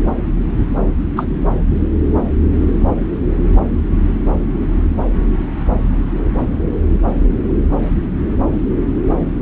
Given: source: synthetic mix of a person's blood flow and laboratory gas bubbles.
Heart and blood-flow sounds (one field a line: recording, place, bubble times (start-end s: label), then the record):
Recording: Doppler ultrasound of blood flow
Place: subclavian vein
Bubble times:
1.16-1.27 s: bubbles
From the record:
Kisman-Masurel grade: 113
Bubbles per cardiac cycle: 1 to 2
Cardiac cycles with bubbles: 1 to 10%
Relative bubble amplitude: loud (0.450 to 0.775)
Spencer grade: 1 (occasional bubble signal discernible with the cardiac motion signal, with majority of cardiac periods free of bubbles)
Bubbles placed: anywhere in the cardiac cycle